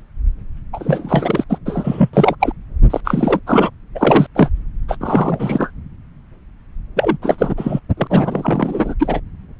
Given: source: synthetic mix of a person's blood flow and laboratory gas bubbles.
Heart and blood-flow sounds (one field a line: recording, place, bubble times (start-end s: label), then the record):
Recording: Doppler ultrasound of blood flow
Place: subclavian vein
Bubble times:
0.73-1.44 s: bubbles
1.49-1.58 s: bubbles
1.65-2.10 s: bubbles
2.13-2.35 s: bubbles
2.40-2.53 s: bubbles
2.90-3.01 s: bubbles
3.04-3.40 s: bubbles
3.47-3.70 s: bubbles
3.95-4.27 s: bubbles
4.35-4.49 s: bubbles
4.88-4.96 s: bubbles
5.00-5.71 s: bubbles
6.96-7.17 s: bubbles
7.21-7.54 s: bubbles
7.57-7.79 s: bubbles
7.97-8.07 s: bubbles
8.10-8.95 s: bubbles
9.00-9.20 s: bubbles
From the record:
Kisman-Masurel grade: 333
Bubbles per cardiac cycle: rolling drumbeat, 9 or more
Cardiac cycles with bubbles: 50 to 99%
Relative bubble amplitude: loud (0.450 to 0.775)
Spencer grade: 3 (all of the cardiac periods contain showers or single bubble signals, but not dominating or overriding the cardiac motion signals)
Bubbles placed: anywhere in the cardiac cycle